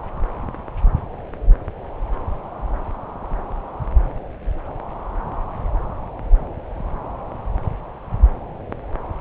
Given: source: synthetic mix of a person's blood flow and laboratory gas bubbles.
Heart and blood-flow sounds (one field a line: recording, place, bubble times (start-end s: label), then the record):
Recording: Doppler ultrasound of blood flow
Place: subclavian vein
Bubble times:
no bubbles
From the record:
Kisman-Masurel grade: 000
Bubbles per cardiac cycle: 0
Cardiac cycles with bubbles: 0%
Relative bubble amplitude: no bubbles discernible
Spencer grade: 0 (complete lack of bubble signals)